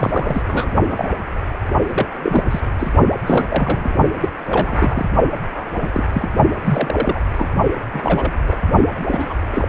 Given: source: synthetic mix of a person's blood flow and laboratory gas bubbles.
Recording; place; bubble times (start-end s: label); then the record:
Doppler ultrasound of blood flow; precordium
0.00-0.43 s: bubbles
0.47-0.72 s: bubbles
0.88-1.09 s: bubbles
1.88-2.06 s: bubbles
2.23-2.44 s: bubbles
2.51-2.60 s: bubbles
2.79-2.94 s: bubbles
3.26-3.94 s: bubbles
4.21-4.29 s: bubbles
4.42-5.05 s: bubbles
5.47-5.90 s: bubbles
5.94-6.04 s: bubbles
6.12-6.29 s: bubbles
6.63-7.20 s: bubbles
7.36-7.48 s: bubbles
7.93-8.32 s: bubbles
8.46-8.56 s: bubbles
9.08-9.34 s: bubbles
9.51-9.67 s: bubbles
From the record:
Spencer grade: 3 (all of the cardiac periods contain showers or single bubble signals, but not dominating or overriding the cardiac motion signals); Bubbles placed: only in the low amplitude regions of the cardiac cycle